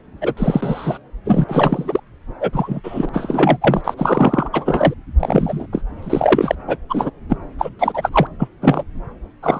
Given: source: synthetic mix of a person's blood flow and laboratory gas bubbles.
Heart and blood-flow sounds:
Doppler ultrasound of blood flow; subclavian vein
0.21-0.34 s: bubbles
0.37-0.98 s: bubbles
1.25-1.44 s: bubbles
1.48-2.00 s: bubbles
2.40-2.80 s: bubbles
2.83-3.09 s: bubbles
3.13-3.58 s: bubbles
3.60-3.82 s: bubbles
3.84-3.95 s: bubbles
3.97-4.49 s: bubbles
4.53-4.94 s: bubbles
5.20-5.67 s: bubbles
5.72-5.82 s: bubbles
6.01-6.55 s: bubbles
6.67-6.77 s: bubbles
6.89-7.10 s: bubbles
7.29-7.37 s: bubbles
7.58-7.70 s: bubbles
7.79-8.10 s: bubbles
8.12-8.27 s: bubbles
8.39-8.48 s: bubbles
8.61-8.84 s: bubbles
9.43-9.60 s: bubbles
From the record:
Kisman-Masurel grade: 233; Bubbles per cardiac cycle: several, 3 to 8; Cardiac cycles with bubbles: 50 to 99%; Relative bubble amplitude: loud (0.450 to 0.775); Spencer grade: 3 (all of the cardiac periods contain showers or single bubble signals, but not dominating or overriding the cardiac motion signals); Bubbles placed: anywhere in the cardiac cycle

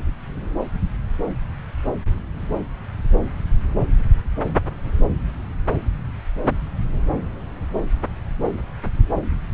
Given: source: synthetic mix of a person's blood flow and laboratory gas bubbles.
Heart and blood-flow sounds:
Doppler ultrasound of blood flow; subclavian vein
no bubbles
From the record:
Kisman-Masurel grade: 000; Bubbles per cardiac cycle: 0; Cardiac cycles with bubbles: 0%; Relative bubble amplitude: no bubbles discernible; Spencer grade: 0 (complete lack of bubble signals)

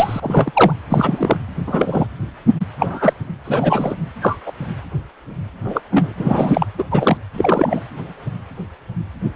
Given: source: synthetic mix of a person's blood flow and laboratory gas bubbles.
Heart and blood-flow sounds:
Doppler ultrasound of blood flow; precordium
0.00-0.73 s: bubbles
0.90-1.38 s: bubbles
1.66-2.06 s: bubbles
2.79-3.13 s: bubbles
3.44-3.95 s: bubbles
4.22-4.37 s: bubbles
4.46-4.52 s: bubbles
5.64-5.81 s: bubbles
5.92-6.13 s: bubbles
6.18-6.67 s: bubbles
6.78-6.83 s: bubbles
6.91-7.18 s: bubbles
7.33-7.83 s: bubbles
From the record:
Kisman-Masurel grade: 233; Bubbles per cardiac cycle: several, 3 to 8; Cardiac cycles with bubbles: 50 to 99%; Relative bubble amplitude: loud (0.450 to 0.775); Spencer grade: 3 (all of the cardiac periods contain showers or single bubble signals, but not dominating or overriding the cardiac motion signals); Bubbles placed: anywhere in the cardiac cycle

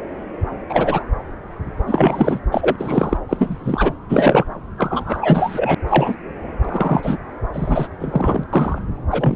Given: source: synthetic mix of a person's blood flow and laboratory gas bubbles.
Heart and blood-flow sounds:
Doppler ultrasound of blood flow; subclavian vein
0.69-1.04 s: bubbles
1.86-2.40 s: bubbles
2.52-3.17 s: bubbles
3.29-3.92 s: bubbles
4.09-4.45 s: bubbles
4.78-5.75 s: bubbles
5.87-6.15 s: bubbles
6.65-7.19 s: bubbles
7.53-7.88 s: bubbles
8.00-8.43 s: bubbles
8.53-8.79 s: bubbles
9.11-9.35 s: bubbles
From the record:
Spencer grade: 3 (all of the cardiac periods contain showers or single bubble signals, but not dominating or overriding the cardiac motion signals); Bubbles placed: anywhere in the cardiac cycle

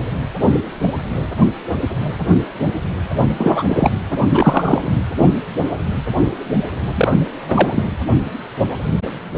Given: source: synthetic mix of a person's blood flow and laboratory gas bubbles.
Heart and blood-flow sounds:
Doppler ultrasound of blood flow; precordium
3.37-3.63 s: bubbles
3.69-3.90 s: bubbles
4.18-4.92 s: bubbles
6.95-7.13 s: bubbles
7.48-7.83 s: bubbles
From the record:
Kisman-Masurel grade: 223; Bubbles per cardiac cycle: several, 3 to 8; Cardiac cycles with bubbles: 10 to 50%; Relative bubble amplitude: loud (0.450 to 0.775); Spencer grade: 2 (many but less than half of the cardiac periods contain bubble signals, singularly or in groups); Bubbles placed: anywhere in the cardiac cycle

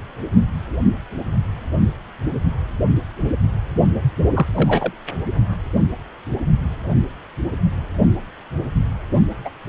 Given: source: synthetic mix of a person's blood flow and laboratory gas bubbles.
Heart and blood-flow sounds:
Doppler ultrasound of blood flow; precordium
4.33-4.46 s: bubbles
4.55-4.92 s: bubbles
9.45-9.50 s: bubbles
From the record:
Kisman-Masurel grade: 222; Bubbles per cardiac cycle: several, 3 to 8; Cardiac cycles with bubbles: 10 to 50%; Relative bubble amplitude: moderate (0.250 to 0.450); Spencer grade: 2 (many but less than half of the cardiac periods contain bubble signals, singularly or in groups); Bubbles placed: only in the low amplitude regions of the cardiac cycle

